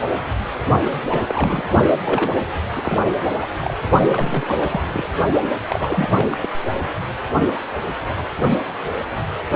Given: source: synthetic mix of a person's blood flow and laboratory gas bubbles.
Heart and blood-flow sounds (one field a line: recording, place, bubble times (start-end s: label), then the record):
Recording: Doppler ultrasound of blood flow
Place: precordium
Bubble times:
0.82-1.05 s: bubbles
1.08-1.62 s: bubbles
2.05-2.31 s: bubbles
2.75-2.82 s: bubbles
2.85-3.07 s: bubbles
3.40-3.47 s: bubbles
3.57-3.74 s: bubbles
4.06-4.81 s: bubbles
4.92-5.08 s: bubbles
5.70-6.08 s: bubbles
6.12-6.28 s: bubbles
6.31-6.37 s: bubbles
6.42-6.49 s: bubbles
From the record:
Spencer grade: 3 (all of the cardiac periods contain showers or single bubble signals, but not dominating or overriding the cardiac motion signals)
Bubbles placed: only in the low amplitude regions of the cardiac cycle